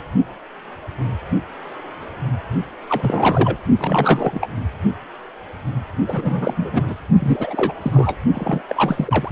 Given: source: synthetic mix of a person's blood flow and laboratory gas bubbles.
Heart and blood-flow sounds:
Doppler ultrasound of blood flow; precordium
2.89-3.57 s: bubbles
3.78-4.49 s: bubbles
6.07-6.95 s: bubbles
7.20-7.74 s: bubbles
7.81-8.17 s: bubbles
8.33-8.61 s: bubbles
8.68-9.32 s: bubbles
From the record:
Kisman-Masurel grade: 332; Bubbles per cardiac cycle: rolling drumbeat, 9 or more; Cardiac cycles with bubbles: 50 to 99%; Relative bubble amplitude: moderate (0.250 to 0.450); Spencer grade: 3 (all of the cardiac periods contain showers or single bubble signals, but not dominating or overriding the cardiac motion signals); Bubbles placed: only in the low amplitude regions of the cardiac cycle

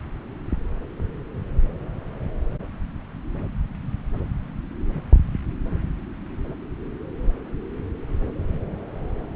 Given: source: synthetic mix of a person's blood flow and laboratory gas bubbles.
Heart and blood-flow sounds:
Doppler ultrasound of blood flow; subclavian vein
no bubbles
From the record:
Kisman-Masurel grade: 000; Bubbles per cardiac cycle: 0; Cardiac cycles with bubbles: 0%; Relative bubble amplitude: no bubbles discernible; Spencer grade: 0 (complete lack of bubble signals)

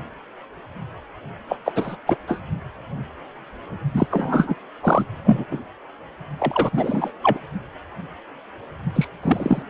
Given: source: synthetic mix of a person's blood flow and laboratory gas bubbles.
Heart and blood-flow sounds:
Doppler ultrasound of blood flow; precordium
1.48-1.56 s: bubbles
1.65-1.72 s: bubbles
1.75-1.96 s: bubbles
2.06-2.17 s: bubbles
2.27-2.40 s: bubbles
3.94-4.07 s: bubbles
4.10-4.54 s: bubbles
4.82-5.06 s: bubbles
5.24-5.45 s: bubbles
5.51-5.58 s: bubbles
6.38-6.70 s: bubbles
6.72-7.12 s: bubbles
7.23-7.39 s: bubbles
8.95-9.08 s: bubbles
9.22-9.62 s: bubbles
From the record:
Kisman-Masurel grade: 233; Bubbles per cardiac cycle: several, 3 to 8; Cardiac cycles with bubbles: 50 to 99%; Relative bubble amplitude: loud (0.450 to 0.775); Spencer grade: 3 (all of the cardiac periods contain showers or single bubble signals, but not dominating or overriding the cardiac motion signals); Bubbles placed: only in the low amplitude regions of the cardiac cycle

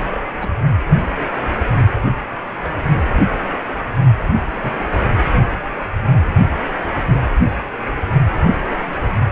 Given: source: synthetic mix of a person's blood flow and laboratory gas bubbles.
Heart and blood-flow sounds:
Doppler ultrasound of blood flow; precordium
0.10-0.20 s: bubbles
0.40-0.49 s: bubbles
2.62-2.70 s: bubbles
4.18-4.25 s: bubbles
4.62-4.87 s: bubbles
From the record:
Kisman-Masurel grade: 121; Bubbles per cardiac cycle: 1 to 2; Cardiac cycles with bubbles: 10 to 50%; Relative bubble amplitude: barely perceptible (0.100 to 0.250); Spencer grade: 2 (many but less than half of the cardiac periods contain bubble signals, singularly or in groups); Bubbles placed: only in the low amplitude regions of the cardiac cycle

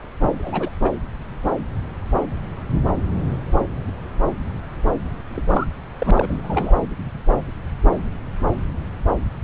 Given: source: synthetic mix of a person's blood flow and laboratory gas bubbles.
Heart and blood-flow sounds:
Doppler ultrasound of blood flow; subclavian vein
0.39-0.70 s: bubbles
0.81-0.90 s: bubbles
5.31-5.45 s: bubbles
5.49-5.67 s: bubbles
6.00-6.74 s: bubbles
From the record:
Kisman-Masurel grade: 222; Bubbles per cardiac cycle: several, 3 to 8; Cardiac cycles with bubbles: 10 to 50%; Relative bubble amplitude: moderate (0.250 to 0.450); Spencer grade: 2 (many but less than half of the cardiac periods contain bubble signals, singularly or in groups); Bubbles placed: anywhere in the cardiac cycle

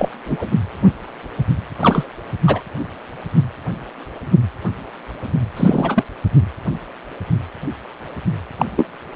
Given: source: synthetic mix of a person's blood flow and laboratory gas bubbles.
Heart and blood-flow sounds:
Doppler ultrasound of blood flow; precordium
0.00-0.09 s: bubbles
0.26-0.49 s: bubbles
1.81-2.04 s: bubbles
2.46-2.61 s: bubbles
5.57-6.04 s: bubbles
8.57-8.65 s: bubbles
8.77-8.86 s: bubbles
From the record:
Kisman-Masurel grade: 233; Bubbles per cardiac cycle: several, 3 to 8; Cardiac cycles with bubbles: 50 to 99%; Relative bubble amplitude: loud (0.450 to 0.775); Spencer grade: 3 (all of the cardiac periods contain showers or single bubble signals, but not dominating or overriding the cardiac motion signals); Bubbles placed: anywhere in the cardiac cycle

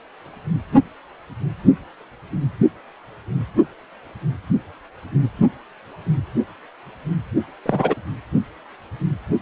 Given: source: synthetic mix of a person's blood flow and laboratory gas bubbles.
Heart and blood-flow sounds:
Doppler ultrasound of blood flow; precordium
7.66-7.95 s: bubbles
From the record:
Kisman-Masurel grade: 213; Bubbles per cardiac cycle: several, 3 to 8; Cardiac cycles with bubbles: 1 to 10%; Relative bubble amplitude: loud (0.450 to 0.775); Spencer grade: 1 (occasional bubble signal discernible with the cardiac motion signal, with majority of cardiac periods free of bubbles); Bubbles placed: only in the low amplitude regions of the cardiac cycle

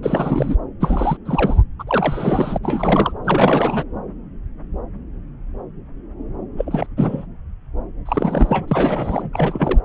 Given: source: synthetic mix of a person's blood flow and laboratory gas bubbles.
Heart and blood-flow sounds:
Doppler ultrasound of blood flow; subclavian vein
0.03-0.57 s: bubbles
0.80-1.17 s: bubbles
1.25-1.62 s: bubbles
1.79-1.83 s: bubbles
1.87-2.58 s: bubbles
2.63-3.13 s: bubbles
3.25-3.83 s: bubbles
6.57-6.86 s: bubbles
6.97-7.26 s: bubbles
8.05-9.30 s: bubbles
9.33-9.80 s: bubbles
From the record:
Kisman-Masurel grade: 332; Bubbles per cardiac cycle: rolling drumbeat, 9 or more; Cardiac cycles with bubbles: 50 to 99%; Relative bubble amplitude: moderate (0.250 to 0.450); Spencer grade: 3 (all of the cardiac periods contain showers or single bubble signals, but not dominating or overriding the cardiac motion signals); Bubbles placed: anywhere in the cardiac cycle

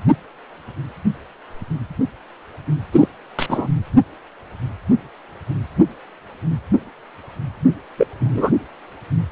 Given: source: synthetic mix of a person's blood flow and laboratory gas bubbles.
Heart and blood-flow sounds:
Doppler ultrasound of blood flow; precordium
2.93-3.08 s: bubbles
3.39-3.68 s: bubbles
7.97-8.07 s: bubbles
8.20-8.51 s: bubbles
From the record:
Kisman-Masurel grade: 223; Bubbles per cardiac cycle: several, 3 to 8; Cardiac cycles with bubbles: 10 to 50%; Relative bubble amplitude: loud (0.450 to 0.775); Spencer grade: 2 (many but less than half of the cardiac periods contain bubble signals, singularly or in groups); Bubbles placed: anywhere in the cardiac cycle

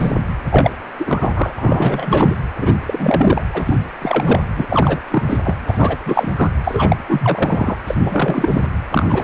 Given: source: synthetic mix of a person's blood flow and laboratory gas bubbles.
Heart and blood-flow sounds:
Doppler ultrasound of blood flow; precordium
0.00-0.15 s: bubbles
0.49-0.71 s: bubbles
0.99-1.52 s: bubbles
1.58-2.35 s: bubbles
2.60-2.74 s: bubbles
2.87-3.44 s: bubbles
3.54-3.76 s: bubbles
4.01-4.43 s: bubbles
4.56-4.66 s: bubbles
4.69-4.99 s: bubbles
5.10-5.23 s: bubbles
5.26-5.38 s: bubbles
5.44-5.57 s: bubbles
5.67-5.97 s: bubbles
6.05-6.30 s: bubbles
6.36-6.50 s: bubbles
6.63-6.97 s: bubbles
7.08-7.74 s: bubbles
7.87-7.95 s: bubbles
8.04-8.67 s: bubbles
8.91-9.05 s: bubbles
9.09-9.24 s: bubbles
From the record:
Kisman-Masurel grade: 343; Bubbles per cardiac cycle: rolling drumbeat, 9 or more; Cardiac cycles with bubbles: 100%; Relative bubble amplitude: loud (0.450 to 0.775); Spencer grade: 3 (all of the cardiac periods contain showers or single bubble signals, but not dominating or overriding the cardiac motion signals); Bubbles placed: anywhere in the cardiac cycle

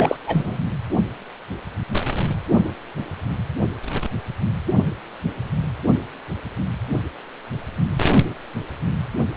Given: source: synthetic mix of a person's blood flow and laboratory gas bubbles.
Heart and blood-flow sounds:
Doppler ultrasound of blood flow; precordium
0.00-0.16 s: bubbles
0.26-0.58 s: bubbles
From the record:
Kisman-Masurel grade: 213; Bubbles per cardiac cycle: several, 3 to 8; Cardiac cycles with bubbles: 1 to 10%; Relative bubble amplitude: loud (0.450 to 0.775); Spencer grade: 1 (occasional bubble signal discernible with the cardiac motion signal, with majority of cardiac periods free of bubbles); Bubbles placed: anywhere in the cardiac cycle

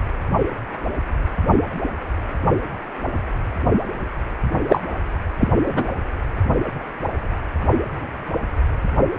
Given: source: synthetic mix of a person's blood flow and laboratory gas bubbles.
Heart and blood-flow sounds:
Doppler ultrasound of blood flow; precordium
4.68-4.83 s: bubbles
5.40-5.50 s: bubbles
5.65-5.88 s: bubbles
From the record:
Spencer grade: 2 (many but less than half of the cardiac periods contain bubble signals, singularly or in groups); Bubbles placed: anywhere in the cardiac cycle

